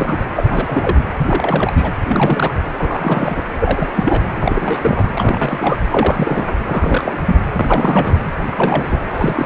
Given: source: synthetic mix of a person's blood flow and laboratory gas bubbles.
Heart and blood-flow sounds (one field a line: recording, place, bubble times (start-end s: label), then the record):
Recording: Doppler ultrasound of blood flow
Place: precordium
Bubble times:
0.00-0.18 s: bubbles
0.35-1.03 s: bubbles
1.19-1.92 s: bubbles
2.07-2.54 s: bubbles
2.77-3.43 s: bubbles
3.59-3.89 s: bubbles
3.93-4.24 s: bubbles
4.36-5.04 s: bubbles
5.14-5.78 s: bubbles
5.92-6.55 s: bubbles
6.66-7.17 s: bubbles
7.27-7.38 s: bubbles
7.52-8.18 s: bubbles
8.47-9.04 s: bubbles
9.10-9.46 s: bubbles
From the record:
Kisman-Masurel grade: 342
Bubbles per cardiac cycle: rolling drumbeat, 9 or more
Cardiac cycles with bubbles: 100%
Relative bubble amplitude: moderate (0.250 to 0.450)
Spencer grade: 3 (all of the cardiac periods contain showers or single bubble signals, but not dominating or overriding the cardiac motion signals)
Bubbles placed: anywhere in the cardiac cycle